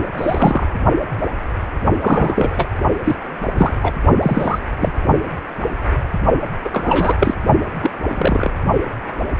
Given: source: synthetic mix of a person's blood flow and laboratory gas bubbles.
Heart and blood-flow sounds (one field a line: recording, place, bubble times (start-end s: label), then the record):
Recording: Doppler ultrasound of blood flow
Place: precordium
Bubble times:
0.17-0.67 s: bubbles
2.01-2.69 s: bubbles
3.04-3.16 s: bubbles
3.57-3.73 s: bubbles
3.82-3.94 s: bubbles
4.22-4.59 s: bubbles
4.81-4.92 s: bubbles
6.64-6.69 s: bubbles
6.72-7.16 s: bubbles
7.20-7.34 s: bubbles
7.82-7.91 s: bubbles
8.10-8.52 s: bubbles
From the record:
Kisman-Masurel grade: 233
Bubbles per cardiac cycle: several, 3 to 8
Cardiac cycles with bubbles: 50 to 99%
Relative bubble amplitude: loud (0.450 to 0.775)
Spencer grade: 3 (all of the cardiac periods contain showers or single bubble signals, but not dominating or overriding the cardiac motion signals)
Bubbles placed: only in the low amplitude regions of the cardiac cycle